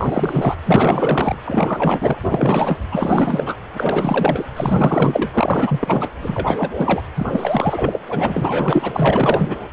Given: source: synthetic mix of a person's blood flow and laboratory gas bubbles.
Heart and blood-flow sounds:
Doppler ultrasound of blood flow; precordium
0.00-0.55 s: bubbles
0.65-1.35 s: bubbles
1.46-2.18 s: bubbles
2.23-2.79 s: bubbles
2.92-3.56 s: bubbles
3.74-4.46 s: bubbles
4.56-6.11 s: bubbles
6.22-7.03 s: bubbles
7.16-7.27 s: bubbles
7.32-7.99 s: bubbles
8.10-9.56 s: bubbles
From the record:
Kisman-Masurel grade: 444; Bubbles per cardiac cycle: continuous sound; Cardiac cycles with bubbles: 100%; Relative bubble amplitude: maximal (0.775 to 0.999); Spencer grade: 4 (maximum detectable bubble signal sounding continuously throughout systole and diastole of every cardiac period, and overriding the amplitude of the normal cardiac signals); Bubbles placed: anywhere in the cardiac cycle

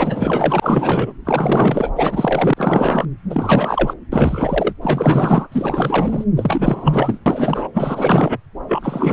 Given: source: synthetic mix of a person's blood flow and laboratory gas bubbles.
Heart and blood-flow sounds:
Doppler ultrasound of blood flow; subclavian vein
0.00-1.12 s: bubbles
1.25-1.91 s: bubbles
1.96-2.54 s: bubbles
2.57-3.05 s: bubbles
3.29-3.94 s: bubbles
4.12-4.73 s: bubbles
4.81-5.47 s: bubbles
5.51-6.24 s: bubbles
6.37-7.21 s: bubbles
7.26-7.68 s: bubbles
7.73-8.38 s: bubbles
8.67-9.13 s: bubbles
From the record:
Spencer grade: 4 (maximum detectable bubble signal sounding continuously throughout systole and diastole of every cardiac period, and overriding the amplitude of the normal cardiac signals); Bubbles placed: anywhere in the cardiac cycle

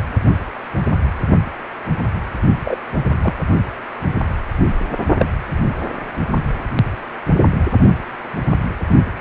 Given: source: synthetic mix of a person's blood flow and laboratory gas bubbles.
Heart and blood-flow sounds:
Doppler ultrasound of blood flow; precordium
2.65-2.77 s: bubbles
3.23-3.33 s: bubbles
5.17-5.26 s: bubbles
From the record:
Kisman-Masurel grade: 122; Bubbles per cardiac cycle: 1 to 2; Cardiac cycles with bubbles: 10 to 50%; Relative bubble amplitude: moderate (0.250 to 0.450); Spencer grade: 2 (many but less than half of the cardiac periods contain bubble signals, singularly or in groups); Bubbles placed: only in the low amplitude regions of the cardiac cycle

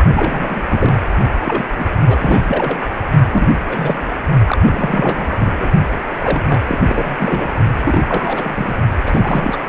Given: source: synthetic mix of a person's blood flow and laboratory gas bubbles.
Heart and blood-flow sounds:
Doppler ultrasound of blood flow; precordium
0.12-0.62 s: bubbles
0.66-1.01 s: bubbles
1.45-1.65 s: bubbles
1.78-1.85 s: bubbles
2.07-2.43 s: bubbles
2.48-2.78 s: bubbles
3.33-3.47 s: bubbles
3.69-4.04 s: bubbles
4.45-4.58 s: bubbles
4.62-5.53 s: bubbles
5.60-5.69 s: bubbles
6.19-6.42 s: bubbles
6.49-6.61 s: bubbles
6.67-6.79 s: bubbles
6.84-7.49 s: bubbles
7.83-8.02 s: bubbles
8.08-8.75 s: bubbles
9.06-9.56 s: bubbles
9.66-9.69 s: bubbles
From the record:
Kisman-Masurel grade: 342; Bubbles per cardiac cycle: rolling drumbeat, 9 or more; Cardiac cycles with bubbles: 100%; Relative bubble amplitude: moderate (0.250 to 0.450); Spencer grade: 3 (all of the cardiac periods contain showers or single bubble signals, but not dominating or overriding the cardiac motion signals); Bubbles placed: only in the low amplitude regions of the cardiac cycle

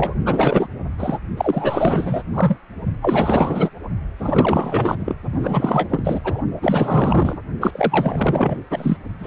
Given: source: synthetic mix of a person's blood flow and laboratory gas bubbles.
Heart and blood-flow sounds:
Doppler ultrasound of blood flow; precordium
0.00-0.15 s: bubbles
0.25-0.68 s: bubbles
0.98-1.18 s: bubbles
1.37-2.23 s: bubbles
2.33-2.58 s: bubbles
3.01-3.69 s: bubbles
4.18-5.15 s: bubbles
5.31-6.21 s: bubbles
6.23-6.42 s: bubbles
6.61-7.38 s: bubbles
7.61-8.63 s: bubbles
8.70-8.97 s: bubbles
9.19-9.27 s: bubbles
From the record:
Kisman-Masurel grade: 444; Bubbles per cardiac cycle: continuous sound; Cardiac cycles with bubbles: 100%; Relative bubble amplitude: maximal (0.775 to 0.999); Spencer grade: 4 (maximum detectable bubble signal sounding continuously throughout systole and diastole of every cardiac period, and overriding the amplitude of the normal cardiac signals); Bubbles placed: only in the low amplitude regions of the cardiac cycle

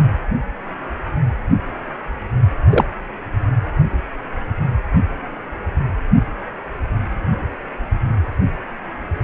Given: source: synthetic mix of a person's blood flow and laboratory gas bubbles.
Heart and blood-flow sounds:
Doppler ultrasound of blood flow; precordium
2.70-2.85 s: bubbles
From the record:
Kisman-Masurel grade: 123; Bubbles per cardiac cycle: 1 to 2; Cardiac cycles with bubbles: 10 to 50%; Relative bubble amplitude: loud (0.450 to 0.775); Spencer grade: 2 (many but less than half of the cardiac periods contain bubble signals, singularly or in groups); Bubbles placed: anywhere in the cardiac cycle

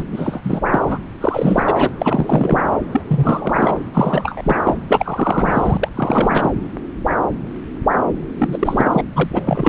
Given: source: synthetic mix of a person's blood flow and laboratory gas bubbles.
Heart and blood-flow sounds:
Doppler ultrasound of blood flow; subclavian vein
0.00-0.03 s: bubbles
0.11-0.41 s: bubbles
0.44-0.61 s: bubbles
0.65-0.99 s: bubbles
1.20-1.90 s: bubbles
1.99-2.69 s: bubbles
2.92-3.01 s: bubbles
3.07-3.77 s: bubbles
3.94-4.62 s: bubbles
4.65-4.75 s: bubbles
4.89-5.89 s: bubbles
5.96-6.51 s: bubbles
8.38-9.03 s: bubbles
9.14-9.69 s: bubbles
From the record:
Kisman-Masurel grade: 333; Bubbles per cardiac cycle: rolling drumbeat, 9 or more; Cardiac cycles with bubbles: 50 to 99%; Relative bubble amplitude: loud (0.450 to 0.775); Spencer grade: 3 (all of the cardiac periods contain showers or single bubble signals, but not dominating or overriding the cardiac motion signals); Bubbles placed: anywhere in the cardiac cycle

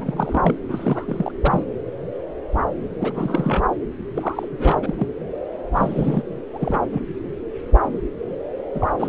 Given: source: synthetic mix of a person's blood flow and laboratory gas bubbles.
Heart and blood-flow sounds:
Doppler ultrasound of blood flow; subclavian vein
0.00-0.55 s: bubbles
0.68-1.31 s: bubbles
1.42-1.64 s: bubbles
3.00-3.62 s: bubbles
4.15-4.48 s: bubbles
4.51-4.95 s: bubbles
4.97-5.08 s: bubbles
5.72-6.22 s: bubbles
6.53-6.79 s: bubbles
6.93-7.02 s: bubbles
8.74-8.88 s: bubbles
8.99-9.09 s: bubbles
From the record:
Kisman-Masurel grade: 332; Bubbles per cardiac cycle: rolling drumbeat, 9 or more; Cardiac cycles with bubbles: 50 to 99%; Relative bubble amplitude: moderate (0.250 to 0.450); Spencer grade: 3 (all of the cardiac periods contain showers or single bubble signals, but not dominating or overriding the cardiac motion signals); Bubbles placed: anywhere in the cardiac cycle

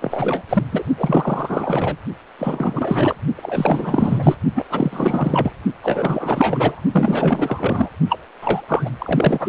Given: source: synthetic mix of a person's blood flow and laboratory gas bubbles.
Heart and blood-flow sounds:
Doppler ultrasound of blood flow; precordium
0.00-0.43 s: bubbles
0.49-0.64 s: bubbles
0.72-0.84 s: bubbles
0.98-1.97 s: bubbles
2.38-3.16 s: bubbles
3.36-4.35 s: bubbles
4.55-4.65 s: bubbles
4.69-5.53 s: bubbles
5.83-6.83 s: bubbles
6.92-7.90 s: bubbles
8.09-8.20 s: bubbles
8.41-8.62 s: bubbles
8.68-8.90 s: bubbles
8.99-9.48 s: bubbles
From the record:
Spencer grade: 4 (maximum detectable bubble signal sounding continuously throughout systole and diastole of every cardiac period, and overriding the amplitude of the normal cardiac signals); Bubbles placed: only in the low amplitude regions of the cardiac cycle

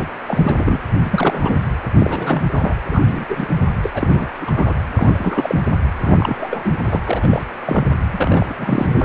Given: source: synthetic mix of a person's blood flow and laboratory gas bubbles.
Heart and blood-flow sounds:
Doppler ultrasound of blood flow; precordium
0.00-0.08 s: bubbles
0.27-0.79 s: bubbles
1.04-1.57 s: bubbles
1.99-2.75 s: bubbles
2.91-3.25 s: bubbles
3.29-3.49 s: bubbles
3.82-4.32 s: bubbles
4.40-4.51 s: bubbles
4.54-4.75 s: bubbles
4.95-5.61 s: bubbles
6.02-6.79 s: bubbles
6.85-7.00 s: bubbles
7.06-7.28 s: bubbles
7.31-7.44 s: bubbles
7.59-7.96 s: bubbles
8.12-8.54 s: bubbles
8.56-9.05 s: bubbles
From the record:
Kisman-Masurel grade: 342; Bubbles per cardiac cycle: rolling drumbeat, 9 or more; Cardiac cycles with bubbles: 100%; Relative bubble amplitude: moderate (0.250 to 0.450); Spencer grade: 3 (all of the cardiac periods contain showers or single bubble signals, but not dominating or overriding the cardiac motion signals); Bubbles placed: anywhere in the cardiac cycle

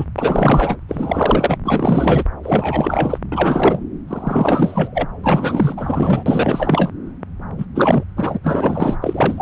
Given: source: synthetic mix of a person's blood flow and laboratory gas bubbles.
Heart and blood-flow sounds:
Doppler ultrasound of blood flow; subclavian vein
0.00-0.05 s: bubbles
0.18-0.77 s: bubbles
0.89-1.57 s: bubbles
1.65-2.24 s: bubbles
2.43-3.18 s: bubbles
3.32-3.79 s: bubbles
4.07-5.08 s: bubbles
5.24-6.23 s: bubbles
6.26-6.91 s: bubbles
7.58-7.66 s: bubbles
7.75-8.04 s: bubbles
8.17-8.38 s: bubbles
8.43-8.99 s: bubbles
9.01-9.42 s: bubbles
From the record:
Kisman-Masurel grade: 444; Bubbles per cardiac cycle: continuous sound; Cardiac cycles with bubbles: 100%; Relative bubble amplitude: maximal (0.775 to 0.999); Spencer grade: 4 (maximum detectable bubble signal sounding continuously throughout systole and diastole of every cardiac period, and overriding the amplitude of the normal cardiac signals); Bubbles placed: anywhere in the cardiac cycle

